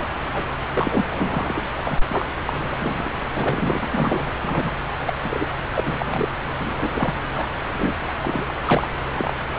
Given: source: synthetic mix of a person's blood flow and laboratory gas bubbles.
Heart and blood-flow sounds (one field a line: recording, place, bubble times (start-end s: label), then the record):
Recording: Doppler ultrasound of blood flow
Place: subclavian vein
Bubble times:
0.00-0.04 s: bubbles
0.34-0.47 s: bubbles
0.73-1.05 s: bubbles
1.11-1.64 s: bubbles
1.76-1.82 s: bubbles
1.84-1.98 s: bubbles
2.08-2.26 s: bubbles
2.46-3.26 s: bubbles
3.35-3.85 s: bubbles
3.90-4.33 s: bubbles
4.42-4.72 s: bubbles
5.05-5.13 s: bubbles
5.24-5.47 s: bubbles
5.75-6.29 s: bubbles
6.58-7.14 s: bubbles
7.33-7.46 s: bubbles
7.71-7.92 s: bubbles
8.06-8.12 s: bubbles
8.22-8.46 s: bubbles
8.48-8.52 s: bubbles
8.65-8.88 s: bubbles
9.15-9.33 s: bubbles
From the record:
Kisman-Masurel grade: 242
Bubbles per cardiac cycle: several, 3 to 8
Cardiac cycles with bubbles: 100%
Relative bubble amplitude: moderate (0.250 to 0.450)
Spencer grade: 3 (all of the cardiac periods contain showers or single bubble signals, but not dominating or overriding the cardiac motion signals)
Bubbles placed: anywhere in the cardiac cycle